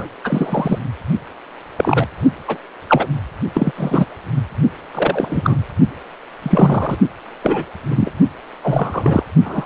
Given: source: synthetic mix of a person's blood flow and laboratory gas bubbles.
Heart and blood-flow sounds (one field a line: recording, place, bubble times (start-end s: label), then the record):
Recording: Doppler ultrasound of blood flow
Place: precordium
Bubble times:
0.00-0.09 s: bubbles
0.24-0.78 s: bubbles
1.76-2.07 s: bubbles
2.48-2.58 s: bubbles
2.88-3.07 s: bubbles
3.54-3.72 s: bubbles
3.77-4.05 s: bubbles
4.93-5.56 s: bubbles
6.42-6.97 s: bubbles
7.42-7.64 s: bubbles
7.90-8.10 s: bubbles
8.62-9.23 s: bubbles
9.45-9.66 s: bubbles
From the record:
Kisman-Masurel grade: 233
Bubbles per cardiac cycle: several, 3 to 8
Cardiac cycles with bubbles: 50 to 99%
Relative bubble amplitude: loud (0.450 to 0.775)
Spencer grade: 3 (all of the cardiac periods contain showers or single bubble signals, but not dominating or overriding the cardiac motion signals)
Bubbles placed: only in the low amplitude regions of the cardiac cycle